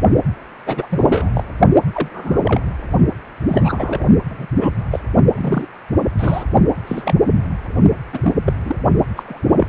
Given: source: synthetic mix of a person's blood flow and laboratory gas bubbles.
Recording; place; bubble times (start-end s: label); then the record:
Doppler ultrasound of blood flow; precordium
0.66-0.86 s: bubbles
0.91-1.30 s: bubbles
1.34-1.43 s: bubbles
1.93-2.41 s: bubbles
2.44-2.60 s: bubbles
3.49-4.05 s: bubbles
4.29-4.46 s: bubbles
4.60-4.70 s: bubbles
4.90-5.00 s: bubbles
5.34-5.67 s: bubbles
6.18-6.44 s: bubbles
6.86-7.14 s: bubbles
8.12-8.34 s: bubbles
8.45-8.53 s: bubbles
8.65-8.76 s: bubbles
9.16-9.68 s: bubbles
From the record:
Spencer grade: 3 (all of the cardiac periods contain showers or single bubble signals, but not dominating or overriding the cardiac motion signals); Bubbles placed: only in the low amplitude regions of the cardiac cycle